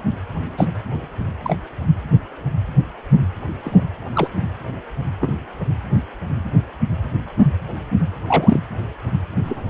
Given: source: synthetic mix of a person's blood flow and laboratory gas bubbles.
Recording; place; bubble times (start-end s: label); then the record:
Doppler ultrasound of blood flow; precordium
0.57-0.67 s: bubbles
1.44-1.55 s: bubbles
3.63-3.87 s: bubbles
4.14-4.29 s: bubbles
5.20-5.33 s: bubbles
5.93-6.03 s: bubbles
8.28-8.60 s: bubbles
9.45-9.70 s: bubbles
From the record:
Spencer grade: 2 (many but less than half of the cardiac periods contain bubble signals, singularly or in groups); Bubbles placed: anywhere in the cardiac cycle